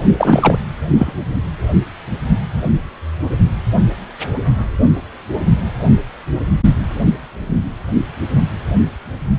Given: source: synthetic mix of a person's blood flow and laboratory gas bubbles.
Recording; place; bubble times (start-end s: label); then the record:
Doppler ultrasound of blood flow; precordium
0.17-0.58 s: bubbles
0.98-1.13 s: bubbles
From the record:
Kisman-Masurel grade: 213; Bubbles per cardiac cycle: several, 3 to 8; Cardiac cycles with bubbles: 1 to 10%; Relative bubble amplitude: loud (0.450 to 0.775); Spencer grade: 1 (occasional bubble signal discernible with the cardiac motion signal, with majority of cardiac periods free of bubbles); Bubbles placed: only in the low amplitude regions of the cardiac cycle